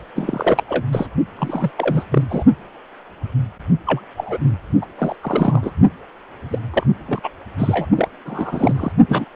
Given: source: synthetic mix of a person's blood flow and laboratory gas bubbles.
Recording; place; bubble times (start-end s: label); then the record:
Doppler ultrasound of blood flow; precordium
0.15-0.64 s: bubbles
0.69-0.84 s: bubbles
0.92-1.06 s: bubbles
1.38-1.71 s: bubbles
1.77-2.04 s: bubbles
2.11-2.26 s: bubbles
2.29-2.44 s: bubbles
3.86-4.01 s: bubbles
4.17-4.38 s: bubbles
4.81-4.86 s: bubbles
4.98-5.16 s: bubbles
5.21-5.71 s: bubbles
6.50-6.58 s: bubbles
6.73-6.83 s: bubbles
7.08-7.19 s: bubbles
7.23-7.29 s: bubbles
7.58-7.86 s: bubbles
7.95-8.09 s: bubbles
8.26-8.92 s: bubbles
9.09-9.25 s: bubbles
From the record:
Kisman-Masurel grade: 232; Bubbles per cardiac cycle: several, 3 to 8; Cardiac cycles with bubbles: 50 to 99%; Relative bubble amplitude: moderate (0.250 to 0.450); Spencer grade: 3 (all of the cardiac periods contain showers or single bubble signals, but not dominating or overriding the cardiac motion signals); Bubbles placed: only in the low amplitude regions of the cardiac cycle